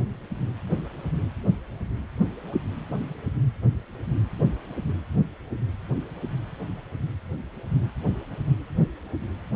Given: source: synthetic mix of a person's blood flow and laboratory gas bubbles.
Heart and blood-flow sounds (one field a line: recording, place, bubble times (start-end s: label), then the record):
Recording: Doppler ultrasound of blood flow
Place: precordium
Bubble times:
no bubbles
From the record:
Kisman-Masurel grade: 000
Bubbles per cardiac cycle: 0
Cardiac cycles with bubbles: 0%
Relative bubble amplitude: no bubbles discernible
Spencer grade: 0 (complete lack of bubble signals)